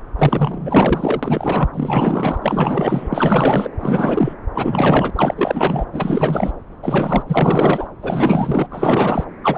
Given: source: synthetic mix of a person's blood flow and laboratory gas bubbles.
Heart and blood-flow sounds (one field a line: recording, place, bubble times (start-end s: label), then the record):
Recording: Doppler ultrasound of blood flow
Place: subclavian vein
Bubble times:
0.18-1.69 s: bubbles
1.72-3.69 s: bubbles
3.79-4.35 s: bubbles
4.54-5.12 s: bubbles
5.15-5.85 s: bubbles
5.93-6.52 s: bubbles
6.82-7.23 s: bubbles
7.28-7.88 s: bubbles
8.03-8.67 s: bubbles
8.70-9.24 s: bubbles
9.42-9.58 s: bubbles
From the record:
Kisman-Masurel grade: 444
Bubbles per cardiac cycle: continuous sound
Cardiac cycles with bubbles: 100%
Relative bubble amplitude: maximal (0.775 to 0.999)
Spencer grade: 4 (maximum detectable bubble signal sounding continuously throughout systole and diastole of every cardiac period, and overriding the amplitude of the normal cardiac signals)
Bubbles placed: anywhere in the cardiac cycle